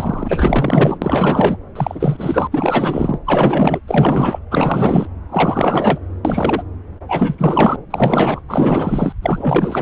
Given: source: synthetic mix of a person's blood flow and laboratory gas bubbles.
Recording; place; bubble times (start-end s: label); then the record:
Doppler ultrasound of blood flow; subclavian vein
0.00-1.57 s: bubbles
1.75-2.48 s: bubbles
2.52-3.19 s: bubbles
3.25-3.81 s: bubbles
3.87-4.39 s: bubbles
4.50-5.07 s: bubbles
5.31-5.98 s: bubbles
6.25-6.63 s: bubbles
7.08-7.35 s: bubbles
7.38-7.76 s: bubbles
7.90-8.41 s: bubbles
8.48-9.12 s: bubbles
9.21-9.82 s: bubbles
From the record:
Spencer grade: 4 (maximum detectable bubble signal sounding continuously throughout systole and diastole of every cardiac period, and overriding the amplitude of the normal cardiac signals); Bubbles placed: anywhere in the cardiac cycle